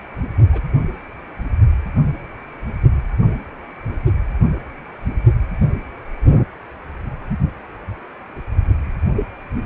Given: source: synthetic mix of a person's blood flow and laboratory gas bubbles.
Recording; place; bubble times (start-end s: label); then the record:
Doppler ultrasound of blood flow; precordium
0.52-0.61 s: bubbles
From the record:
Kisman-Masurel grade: 121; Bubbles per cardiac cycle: 1 to 2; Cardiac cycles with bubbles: 10 to 50%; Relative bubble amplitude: barely perceptible (0.100 to 0.250); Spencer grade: 2 (many but less than half of the cardiac periods contain bubble signals, singularly or in groups); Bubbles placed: only in the low amplitude regions of the cardiac cycle